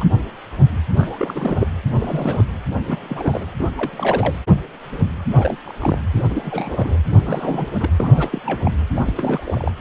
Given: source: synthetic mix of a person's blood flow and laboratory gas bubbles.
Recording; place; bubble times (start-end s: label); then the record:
Doppler ultrasound of blood flow; precordium
0.00-0.05 s: bubbles
0.95-1.67 s: bubbles
1.93-2.44 s: bubbles
2.85-3.46 s: bubbles
3.58-3.69 s: bubbles
3.77-4.35 s: bubbles
5.30-5.58 s: bubbles
5.63-5.99 s: bubbles
6.14-6.21 s: bubbles
6.24-6.97 s: bubbles
7.11-7.67 s: bubbles
7.79-7.90 s: bubbles
8.00-8.42 s: bubbles
8.46-8.72 s: bubbles
8.95-9.72 s: bubbles
From the record:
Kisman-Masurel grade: 332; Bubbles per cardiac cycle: rolling drumbeat, 9 or more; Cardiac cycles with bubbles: 50 to 99%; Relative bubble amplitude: moderate (0.250 to 0.450); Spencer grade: 3 (all of the cardiac periods contain showers or single bubble signals, but not dominating or overriding the cardiac motion signals); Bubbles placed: anywhere in the cardiac cycle